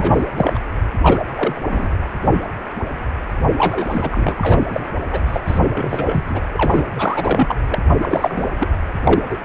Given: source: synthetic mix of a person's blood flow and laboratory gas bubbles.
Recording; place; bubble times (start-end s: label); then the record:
Doppler ultrasound of blood flow; precordium
0.00-0.27 s: bubbles
0.36-0.59 s: bubbles
1.01-1.23 s: bubbles
1.35-1.61 s: bubbles
1.68-1.89 s: bubbles
3.58-4.67 s: bubbles
4.70-4.84 s: bubbles
5.11-5.21 s: bubbles
5.25-5.41 s: bubbles
5.46-5.59 s: bubbles
5.75-6.41 s: bubbles
6.52-6.85 s: bubbles
6.95-7.55 s: bubbles
7.71-7.79 s: bubbles
8.01-8.50 s: bubbles
8.59-8.68 s: bubbles
9.03-9.38 s: bubbles
From the record:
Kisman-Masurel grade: 232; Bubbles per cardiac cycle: several, 3 to 8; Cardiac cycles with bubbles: 50 to 99%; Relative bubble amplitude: moderate (0.250 to 0.450); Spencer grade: 3 (all of the cardiac periods contain showers or single bubble signals, but not dominating or overriding the cardiac motion signals); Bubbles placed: anywhere in the cardiac cycle